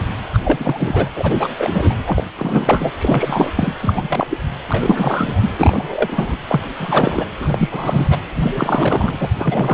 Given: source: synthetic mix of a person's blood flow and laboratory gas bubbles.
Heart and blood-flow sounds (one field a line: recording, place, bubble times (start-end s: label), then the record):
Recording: Doppler ultrasound of blood flow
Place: precordium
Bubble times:
0.33-0.38 s: bubbles
0.44-1.09 s: bubbles
1.15-1.48 s: bubbles
1.58-1.94 s: bubbles
2.06-2.24 s: bubbles
2.36-2.91 s: bubbles
2.98-3.51 s: bubbles
3.55-3.73 s: bubbles
3.81-4.26 s: bubbles
4.29-4.38 s: bubbles
4.68-5.49 s: bubbles
5.58-6.38 s: bubbles
6.47-6.60 s: bubbles
6.79-7.29 s: bubbles
7.39-8.08 s: bubbles
8.10-8.18 s: bubbles
8.41-8.52 s: bubbles
8.55-9.30 s: bubbles
9.38-9.74 s: bubbles
From the record:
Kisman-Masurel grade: 333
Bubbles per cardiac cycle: rolling drumbeat, 9 or more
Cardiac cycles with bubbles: 50 to 99%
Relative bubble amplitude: loud (0.450 to 0.775)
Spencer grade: 3 (all of the cardiac periods contain showers or single bubble signals, but not dominating or overriding the cardiac motion signals)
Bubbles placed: anywhere in the cardiac cycle